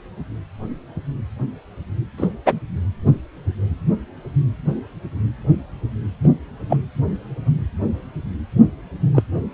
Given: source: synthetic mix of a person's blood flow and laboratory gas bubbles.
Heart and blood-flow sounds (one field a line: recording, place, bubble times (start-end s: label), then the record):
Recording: Doppler ultrasound of blood flow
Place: precordium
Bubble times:
2.17-2.28 s: bubbles
2.46-2.60 s: bubbles
6.23-6.29 s: bubbles
6.69-6.77 s: bubbles
9.14-9.22 s: bubbles
From the record:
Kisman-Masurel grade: 123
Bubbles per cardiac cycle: 1 to 2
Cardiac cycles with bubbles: 10 to 50%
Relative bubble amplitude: loud (0.450 to 0.775)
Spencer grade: 2 (many but less than half of the cardiac periods contain bubble signals, singularly or in groups)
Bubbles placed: anywhere in the cardiac cycle